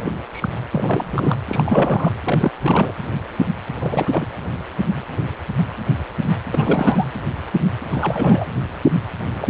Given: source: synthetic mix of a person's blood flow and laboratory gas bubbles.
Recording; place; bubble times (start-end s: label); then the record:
Doppler ultrasound of blood flow; precordium
0.00-0.10 s: bubbles
0.33-0.48 s: bubbles
0.70-1.37 s: bubbles
1.48-2.12 s: bubbles
2.24-2.52 s: bubbles
2.60-2.92 s: bubbles
3.79-4.25 s: bubbles
6.53-7.05 s: bubbles
7.91-8.46 s: bubbles
9.39-9.47 s: bubbles
From the record:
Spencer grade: 3 (all of the cardiac periods contain showers or single bubble signals, but not dominating or overriding the cardiac motion signals); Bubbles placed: anywhere in the cardiac cycle